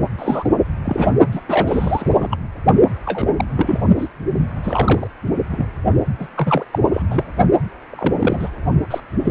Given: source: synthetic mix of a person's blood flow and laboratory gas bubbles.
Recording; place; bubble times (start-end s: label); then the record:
Doppler ultrasound of blood flow; precordium
0.18-0.50 s: bubbles
0.85-1.11 s: bubbles
1.31-1.41 s: bubbles
1.48-2.37 s: bubbles
3.05-3.30 s: bubbles
3.36-3.45 s: bubbles
3.56-3.80 s: bubbles
3.98-4.09 s: bubbles
4.63-5.07 s: bubbles
5.50-5.66 s: bubbles
6.19-6.28 s: bubbles
6.36-6.65 s: bubbles
6.72-6.79 s: bubbles
6.93-7.03 s: bubbles
7.10-7.24 s: bubbles
7.90-8.15 s: bubbles
8.19-8.49 s: bubbles
8.90-9.00 s: bubbles
9.25-9.31 s: bubbles
From the record:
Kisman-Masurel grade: 242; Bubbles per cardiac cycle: several, 3 to 8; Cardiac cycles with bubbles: 100%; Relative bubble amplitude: moderate (0.250 to 0.450); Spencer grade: 3 (all of the cardiac periods contain showers or single bubble signals, but not dominating or overriding the cardiac motion signals); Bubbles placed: only in the low amplitude regions of the cardiac cycle